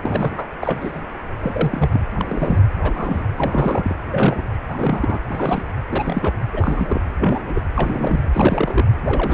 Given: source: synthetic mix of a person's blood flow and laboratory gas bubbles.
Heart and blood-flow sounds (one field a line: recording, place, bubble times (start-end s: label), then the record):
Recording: Doppler ultrasound of blood flow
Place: precordium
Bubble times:
0.02-0.46 s: bubbles
0.60-1.01 s: bubbles
1.43-2.01 s: bubbles
2.20-2.60 s: bubbles
2.82-3.28 s: bubbles
3.36-3.96 s: bubbles
4.11-4.42 s: bubbles
4.71-5.19 s: bubbles
5.27-5.64 s: bubbles
5.92-6.33 s: bubbles
6.53-7.02 s: bubbles
7.21-7.42 s: bubbles
7.54-7.62 s: bubbles
7.75-8.23 s: bubbles
8.34-8.87 s: bubbles
9.04-9.33 s: bubbles
From the record:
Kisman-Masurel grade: 232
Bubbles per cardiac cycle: several, 3 to 8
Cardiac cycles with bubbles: 50 to 99%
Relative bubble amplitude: moderate (0.250 to 0.450)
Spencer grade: 3 (all of the cardiac periods contain showers or single bubble signals, but not dominating or overriding the cardiac motion signals)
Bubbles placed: anywhere in the cardiac cycle